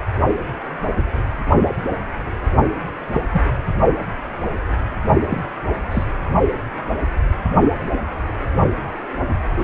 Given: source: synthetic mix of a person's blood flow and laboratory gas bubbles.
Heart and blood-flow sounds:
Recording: Doppler ultrasound of blood flow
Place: precordium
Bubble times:
3.12-3.21 s: bubbles
3.31-3.42 s: bubbles
5.29-5.41 s: bubbles
5.91-6.04 s: bubbles
9.57-9.64 s: bubbles
From the record:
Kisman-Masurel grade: 122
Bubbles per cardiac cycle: 1 to 2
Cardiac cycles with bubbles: 10 to 50%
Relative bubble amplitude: moderate (0.250 to 0.450)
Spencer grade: 2 (many but less than half of the cardiac periods contain bubble signals, singularly or in groups)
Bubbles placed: only in the low amplitude regions of the cardiac cycle

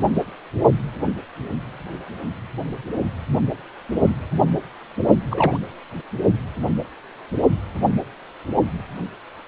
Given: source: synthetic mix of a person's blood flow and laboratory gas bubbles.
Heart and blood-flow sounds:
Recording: Doppler ultrasound of blood flow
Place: precordium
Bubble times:
5.30-5.57 s: bubbles
From the record:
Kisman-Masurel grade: 112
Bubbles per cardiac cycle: 1 to 2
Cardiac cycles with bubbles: 1 to 10%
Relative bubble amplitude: moderate (0.250 to 0.450)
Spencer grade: 1 (occasional bubble signal discernible with the cardiac motion signal, with majority of cardiac periods free of bubbles)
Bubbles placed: only in the low amplitude regions of the cardiac cycle

